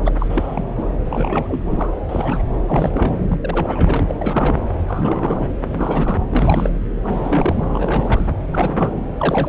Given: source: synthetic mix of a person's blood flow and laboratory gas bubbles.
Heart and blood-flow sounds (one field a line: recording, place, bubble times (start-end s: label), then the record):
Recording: Doppler ultrasound of blood flow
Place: subclavian vein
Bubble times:
0.04-0.12 s: bubbles
0.18-0.64 s: bubbles
0.77-0.84 s: bubbles
1.10-1.61 s: bubbles
1.70-1.91 s: bubbles
2.09-2.43 s: bubbles
2.67-3.11 s: bubbles
3.29-4.15 s: bubbles
4.18-4.65 s: bubbles
4.88-5.49 s: bubbles
5.63-6.17 s: bubbles
6.29-6.70 s: bubbles
7.04-7.69 s: bubbles
7.73-8.32 s: bubbles
8.51-8.91 s: bubbles
9.18-9.49 s: bubbles
From the record:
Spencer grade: 3 (all of the cardiac periods contain showers or single bubble signals, but not dominating or overriding the cardiac motion signals)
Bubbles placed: anywhere in the cardiac cycle